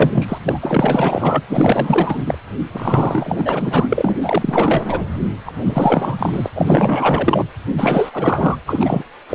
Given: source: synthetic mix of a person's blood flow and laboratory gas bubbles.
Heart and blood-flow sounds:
Doppler ultrasound of blood flow; precordium
0.00-0.39 s: bubbles
0.47-0.58 s: bubbles
0.61-1.42 s: bubbles
1.48-2.38 s: bubbles
2.71-4.17 s: bubbles
4.21-5.03 s: bubbles
5.46-6.48 s: bubbles
6.55-7.45 s: bubbles
7.77-8.56 s: bubbles
8.66-9.03 s: bubbles
9.29-9.35 s: bubbles
From the record:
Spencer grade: 4 (maximum detectable bubble signal sounding continuously throughout systole and diastole of every cardiac period, and overriding the amplitude of the normal cardiac signals); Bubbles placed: anywhere in the cardiac cycle

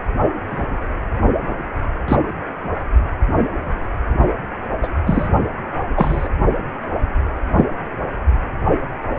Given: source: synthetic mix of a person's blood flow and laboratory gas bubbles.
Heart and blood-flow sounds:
Doppler ultrasound of blood flow; precordium
0.51-0.65 s: bubbles
2.08-2.17 s: bubbles
4.83-4.88 s: bubbles
5.06-5.29 s: bubbles
5.96-6.29 s: bubbles
7.57-7.66 s: bubbles
From the record:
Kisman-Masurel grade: 123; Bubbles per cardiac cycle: 1 to 2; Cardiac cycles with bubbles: 10 to 50%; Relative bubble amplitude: loud (0.450 to 0.775); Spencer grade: 2 (many but less than half of the cardiac periods contain bubble signals, singularly or in groups); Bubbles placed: only in the low amplitude regions of the cardiac cycle

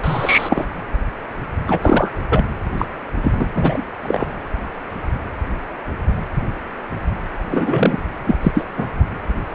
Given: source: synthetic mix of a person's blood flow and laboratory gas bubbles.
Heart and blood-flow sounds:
Doppler ultrasound of blood flow; precordium
0.00-0.66 s: bubbles
1.68-1.79 s: bubbles
1.81-2.19 s: bubbles
2.29-2.44 s: bubbles
2.77-2.85 s: bubbles
3.21-3.33 s: bubbles
3.39-3.46 s: bubbles
3.54-3.84 s: bubbles
4.02-4.27 s: bubbles
7.50-8.01 s: bubbles
8.26-8.36 s: bubbles
8.42-8.65 s: bubbles
8.77-8.86 s: bubbles
From the record:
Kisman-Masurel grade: 223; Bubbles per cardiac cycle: several, 3 to 8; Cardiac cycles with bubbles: 10 to 50%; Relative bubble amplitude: loud (0.450 to 0.775); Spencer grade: 2 (many but less than half of the cardiac periods contain bubble signals, singularly or in groups); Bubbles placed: anywhere in the cardiac cycle

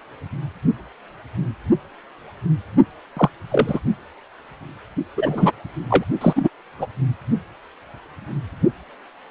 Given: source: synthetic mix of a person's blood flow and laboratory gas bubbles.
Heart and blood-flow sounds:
Doppler ultrasound of blood flow; precordium
3.17-3.29 s: bubbles
3.48-3.79 s: bubbles
5.17-5.52 s: bubbles
5.90-6.04 s: bubbles
6.21-6.49 s: bubbles
6.79-6.87 s: bubbles
From the record:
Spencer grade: 2 (many but less than half of the cardiac periods contain bubble signals, singularly or in groups); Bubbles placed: only in the low amplitude regions of the cardiac cycle

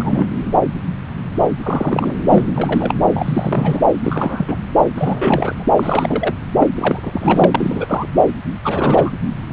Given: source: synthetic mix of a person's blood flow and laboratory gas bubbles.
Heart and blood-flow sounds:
Doppler ultrasound of blood flow; subclavian vein
0.00-0.26 s: bubbles
1.63-2.14 s: bubbles
2.27-2.46 s: bubbles
2.56-2.94 s: bubbles
3.09-3.82 s: bubbles
3.96-4.57 s: bubbles
4.96-5.69 s: bubbles
5.77-6.35 s: bubbles
6.59-6.68 s: bubbles
6.75-8.08 s: bubbles
8.64-9.11 s: bubbles
From the record:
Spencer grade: 3 (all of the cardiac periods contain showers or single bubble signals, but not dominating or overriding the cardiac motion signals); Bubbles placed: anywhere in the cardiac cycle

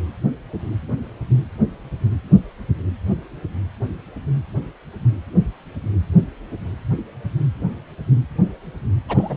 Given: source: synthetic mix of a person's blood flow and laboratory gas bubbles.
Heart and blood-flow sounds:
Doppler ultrasound of blood flow; precordium
9.08-9.37 s: bubbles
From the record:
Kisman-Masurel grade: 212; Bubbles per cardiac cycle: several, 3 to 8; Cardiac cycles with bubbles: 1 to 10%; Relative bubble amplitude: moderate (0.250 to 0.450); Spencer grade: 1 (occasional bubble signal discernible with the cardiac motion signal, with majority of cardiac periods free of bubbles); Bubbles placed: anywhere in the cardiac cycle

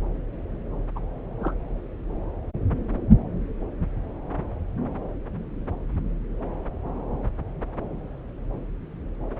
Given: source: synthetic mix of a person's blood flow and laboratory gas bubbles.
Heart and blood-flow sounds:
Doppler ultrasound of blood flow; subclavian vein
0.95-0.99 s: bubbles
1.40-1.53 s: bubbles
From the record:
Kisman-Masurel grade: 111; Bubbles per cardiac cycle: 1 to 2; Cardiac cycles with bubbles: 1 to 10%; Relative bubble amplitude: barely perceptible (0.100 to 0.250); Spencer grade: 1 (occasional bubble signal discernible with the cardiac motion signal, with majority of cardiac periods free of bubbles); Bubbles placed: anywhere in the cardiac cycle

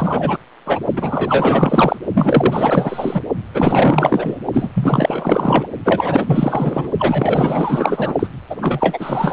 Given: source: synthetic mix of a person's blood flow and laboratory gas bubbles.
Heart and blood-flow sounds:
Doppler ultrasound of blood flow; precordium
0.00-0.37 s: bubbles
0.66-0.80 s: bubbles
0.96-1.98 s: bubbles
2.13-3.21 s: bubbles
3.54-4.38 s: bubbles
4.53-4.68 s: bubbles
4.74-5.67 s: bubbles
5.84-6.90 s: bubbles
6.98-8.14 s: bubbles
8.19-8.27 s: bubbles
8.50-8.56 s: bubbles
8.61-9.33 s: bubbles
From the record:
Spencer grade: 4 (maximum detectable bubble signal sounding continuously throughout systole and diastole of every cardiac period, and overriding the amplitude of the normal cardiac signals); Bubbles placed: only in the low amplitude regions of the cardiac cycle

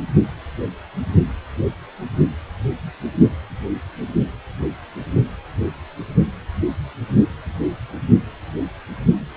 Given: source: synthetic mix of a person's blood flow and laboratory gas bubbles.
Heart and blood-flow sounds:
Doppler ultrasound of blood flow; precordium
no bubbles
From the record:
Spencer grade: 0 (complete lack of bubble signals)

